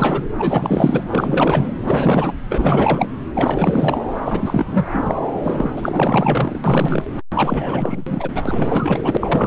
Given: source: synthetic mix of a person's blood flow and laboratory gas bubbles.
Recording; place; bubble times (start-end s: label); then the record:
Doppler ultrasound of blood flow; subclavian vein
0.00-0.23 s: bubbles
0.38-1.04 s: bubbles
1.09-1.75 s: bubbles
1.83-2.35 s: bubbles
2.49-3.08 s: bubbles
3.35-4.00 s: bubbles
4.25-4.88 s: bubbles
4.93-5.19 s: bubbles
5.43-6.62 s: bubbles
6.64-7.04 s: bubbles
7.34-8.29 s: bubbles
8.35-8.43 s: bubbles
8.46-9.17 s: bubbles
9.20-9.47 s: bubbles
From the record:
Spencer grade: 4 (maximum detectable bubble signal sounding continuously throughout systole and diastole of every cardiac period, and overriding the amplitude of the normal cardiac signals); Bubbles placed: anywhere in the cardiac cycle